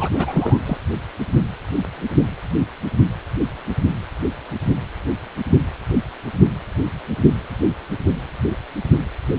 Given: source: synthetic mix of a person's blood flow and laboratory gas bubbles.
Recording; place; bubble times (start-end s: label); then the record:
Doppler ultrasound of blood flow; precordium
0.00-0.09 s: bubbles
0.14-0.60 s: bubbles
0.65-0.78 s: bubbles
From the record:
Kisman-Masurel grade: 212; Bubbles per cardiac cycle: several, 3 to 8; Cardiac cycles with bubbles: 1 to 10%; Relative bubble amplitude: moderate (0.250 to 0.450); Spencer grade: 1 (occasional bubble signal discernible with the cardiac motion signal, with majority of cardiac periods free of bubbles); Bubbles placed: anywhere in the cardiac cycle